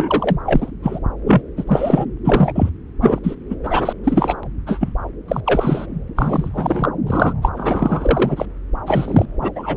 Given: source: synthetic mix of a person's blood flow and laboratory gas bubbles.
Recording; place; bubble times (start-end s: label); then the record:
Doppler ultrasound of blood flow; subclavian vein
0.00-0.36 s: bubbles
0.45-0.71 s: bubbles
0.83-0.99 s: bubbles
1.26-1.41 s: bubbles
1.57-1.64 s: bubbles
1.67-2.05 s: bubbles
2.24-2.70 s: bubbles
3.01-3.19 s: bubbles
3.23-3.35 s: bubbles
3.50-3.56 s: bubbles
3.63-3.93 s: bubbles
4.03-4.36 s: bubbles
4.67-4.92 s: bubbles
5.28-5.40 s: bubbles
5.46-5.86 s: bubbles
6.15-6.89 s: bubbles
7.06-7.33 s: bubbles
7.42-7.49 s: bubbles
7.55-8.46 s: bubbles
8.86-9.26 s: bubbles
9.41-9.51 s: bubbles
9.55-9.76 s: bubbles
From the record:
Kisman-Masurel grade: 343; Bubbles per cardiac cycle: rolling drumbeat, 9 or more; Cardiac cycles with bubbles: 100%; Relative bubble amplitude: loud (0.450 to 0.775); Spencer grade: 3 (all of the cardiac periods contain showers or single bubble signals, but not dominating or overriding the cardiac motion signals); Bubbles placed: anywhere in the cardiac cycle